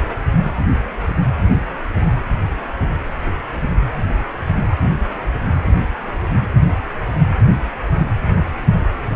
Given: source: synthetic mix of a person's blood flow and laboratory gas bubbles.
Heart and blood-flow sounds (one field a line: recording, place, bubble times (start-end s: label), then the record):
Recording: Doppler ultrasound of blood flow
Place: precordium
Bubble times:
no bubbles
From the record:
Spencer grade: 0 (complete lack of bubble signals)